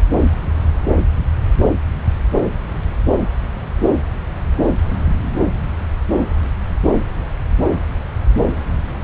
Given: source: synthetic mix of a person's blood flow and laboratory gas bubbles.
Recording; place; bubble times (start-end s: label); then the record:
Doppler ultrasound of blood flow; subclavian vein
no bubbles
From the record:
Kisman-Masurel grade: 000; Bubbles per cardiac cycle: 0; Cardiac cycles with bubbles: 0%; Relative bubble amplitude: no bubbles discernible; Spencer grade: 0 (complete lack of bubble signals)